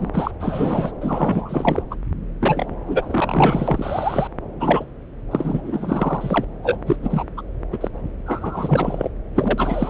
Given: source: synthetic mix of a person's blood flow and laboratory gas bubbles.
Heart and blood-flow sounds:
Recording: Doppler ultrasound of blood flow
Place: subclavian vein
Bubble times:
0.00-0.10 s: bubbles
0.13-0.31 s: bubbles
0.40-0.91 s: bubbles
1.01-1.82 s: bubbles
1.91-1.95 s: bubbles
2.42-2.69 s: bubbles
2.86-4.28 s: bubbles
4.59-4.85 s: bubbles
5.31-6.45 s: bubbles
6.63-6.76 s: bubbles
6.87-6.96 s: bubbles
7.02-7.24 s: bubbles
7.37-7.42 s: bubbles
7.72-7.88 s: bubbles
8.26-9.09 s: bubbles
9.35-9.90 s: bubbles
From the record:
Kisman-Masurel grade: 342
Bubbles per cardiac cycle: rolling drumbeat, 9 or more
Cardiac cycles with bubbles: 100%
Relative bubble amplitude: moderate (0.250 to 0.450)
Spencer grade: 3 (all of the cardiac periods contain showers or single bubble signals, but not dominating or overriding the cardiac motion signals)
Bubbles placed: anywhere in the cardiac cycle

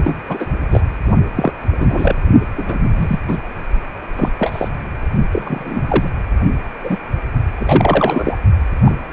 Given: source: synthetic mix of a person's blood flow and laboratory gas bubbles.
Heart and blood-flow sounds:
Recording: Doppler ultrasound of blood flow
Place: precordium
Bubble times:
0.04-0.16 s: bubbles
0.28-0.47 s: bubbles
0.72-0.81 s: bubbles
1.36-1.52 s: bubbles
1.79-2.16 s: bubbles
2.58-2.64 s: bubbles
2.68-2.79 s: bubbles
2.98-3.19 s: bubbles
3.27-3.37 s: bubbles
4.16-4.29 s: bubbles
4.38-4.68 s: bubbles
5.32-6.08 s: bubbles
6.83-6.96 s: bubbles
7.55-8.37 s: bubbles
8.85-8.92 s: bubbles
From the record:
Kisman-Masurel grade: 243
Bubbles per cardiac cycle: several, 3 to 8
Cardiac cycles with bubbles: 100%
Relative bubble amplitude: loud (0.450 to 0.775)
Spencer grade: 3 (all of the cardiac periods contain showers or single bubble signals, but not dominating or overriding the cardiac motion signals)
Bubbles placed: only in the low amplitude regions of the cardiac cycle

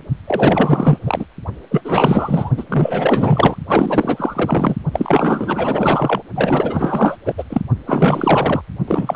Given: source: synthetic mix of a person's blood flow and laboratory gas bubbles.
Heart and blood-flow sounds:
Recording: Doppler ultrasound of blood flow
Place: precordium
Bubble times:
0.27-0.99 s: bubbles
1.05-1.25 s: bubbles
1.70-1.82 s: bubbles
1.84-2.50 s: bubbles
2.57-2.64 s: bubbles
2.69-3.56 s: bubbles
3.68-4.76 s: bubbles
4.92-6.21 s: bubbles
6.35-7.17 s: bubbles
7.25-7.33 s: bubbles
7.38-7.43 s: bubbles
7.50-7.61 s: bubbles
7.87-8.62 s: bubbles
8.87-9.15 s: bubbles
From the record:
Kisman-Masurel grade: 444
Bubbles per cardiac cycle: continuous sound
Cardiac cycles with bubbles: 100%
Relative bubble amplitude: maximal (0.775 to 0.999)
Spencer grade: 4 (maximum detectable bubble signal sounding continuously throughout systole and diastole of every cardiac period, and overriding the amplitude of the normal cardiac signals)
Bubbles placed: only in the low amplitude regions of the cardiac cycle

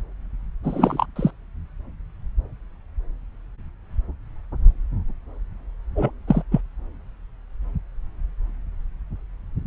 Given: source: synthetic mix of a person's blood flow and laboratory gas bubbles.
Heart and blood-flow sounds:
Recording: Doppler ultrasound of blood flow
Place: subclavian vein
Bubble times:
0.64-1.05 s: bubbles
1.16-1.30 s: bubbles
5.95-6.10 s: bubbles
6.27-6.43 s: bubbles
6.51-6.61 s: bubbles
From the record:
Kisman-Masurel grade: 223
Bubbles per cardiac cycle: several, 3 to 8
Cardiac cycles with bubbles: 10 to 50%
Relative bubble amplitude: loud (0.450 to 0.775)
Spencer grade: 2 (many but less than half of the cardiac periods contain bubble signals, singularly or in groups)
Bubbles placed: anywhere in the cardiac cycle

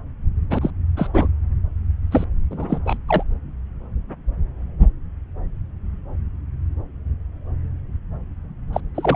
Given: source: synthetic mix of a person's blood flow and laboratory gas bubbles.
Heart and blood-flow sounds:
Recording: Doppler ultrasound of blood flow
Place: subclavian vein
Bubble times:
0.50-0.58 s: bubbles
0.61-0.71 s: bubbles
0.97-1.09 s: bubbles
1.14-1.27 s: bubbles
2.11-2.24 s: bubbles
2.50-2.80 s: bubbles
2.85-2.97 s: bubbles
3.07-3.23 s: bubbles
8.72-8.80 s: bubbles
8.95-9.16 s: bubbles
From the record:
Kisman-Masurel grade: 223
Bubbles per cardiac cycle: several, 3 to 8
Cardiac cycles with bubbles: 10 to 50%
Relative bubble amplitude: loud (0.450 to 0.775)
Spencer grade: 2 (many but less than half of the cardiac periods contain bubble signals, singularly or in groups)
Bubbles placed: anywhere in the cardiac cycle

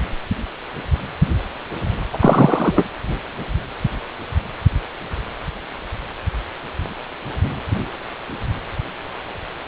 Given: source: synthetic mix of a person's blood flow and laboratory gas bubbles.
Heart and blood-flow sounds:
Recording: Doppler ultrasound of blood flow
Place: precordium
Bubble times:
2.13-2.83 s: bubbles
From the record:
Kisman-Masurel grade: 213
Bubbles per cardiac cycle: several, 3 to 8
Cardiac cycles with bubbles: 1 to 10%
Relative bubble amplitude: loud (0.450 to 0.775)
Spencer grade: 1 (occasional bubble signal discernible with the cardiac motion signal, with majority of cardiac periods free of bubbles)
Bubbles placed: anywhere in the cardiac cycle

